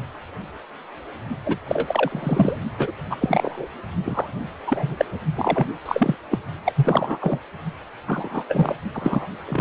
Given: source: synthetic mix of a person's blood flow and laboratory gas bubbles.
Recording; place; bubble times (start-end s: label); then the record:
Doppler ultrasound of blood flow; precordium
1.46-1.57 s: bubbles
1.68-2.58 s: bubbles
2.78-2.92 s: bubbles
3.10-3.15 s: bubbles
3.21-3.67 s: bubbles
4.04-4.32 s: bubbles
4.67-5.05 s: bubbles
5.36-5.67 s: bubbles
5.85-6.16 s: bubbles
6.31-6.38 s: bubbles
6.66-6.73 s: bubbles
6.76-7.18 s: bubbles
7.21-7.38 s: bubbles
8.06-8.44 s: bubbles
8.48-8.75 s: bubbles
8.94-9.27 s: bubbles
9.47-9.61 s: bubbles
From the record:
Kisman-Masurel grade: 232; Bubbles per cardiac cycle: several, 3 to 8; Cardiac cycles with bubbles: 50 to 99%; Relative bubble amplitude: moderate (0.250 to 0.450); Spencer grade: 3 (all of the cardiac periods contain showers or single bubble signals, but not dominating or overriding the cardiac motion signals); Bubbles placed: only in the low amplitude regions of the cardiac cycle